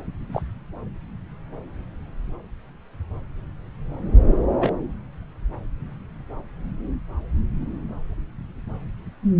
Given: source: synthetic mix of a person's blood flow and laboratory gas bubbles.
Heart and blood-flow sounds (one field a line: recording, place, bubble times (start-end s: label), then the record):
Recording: Doppler ultrasound of blood flow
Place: subclavian vein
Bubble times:
0.32-0.42 s: bubbles
4.60-4.72 s: bubbles
From the record:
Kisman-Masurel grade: 122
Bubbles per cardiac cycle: 1 to 2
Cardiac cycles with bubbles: 10 to 50%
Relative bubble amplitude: moderate (0.250 to 0.450)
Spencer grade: 2 (many but less than half of the cardiac periods contain bubble signals, singularly or in groups)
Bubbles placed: anywhere in the cardiac cycle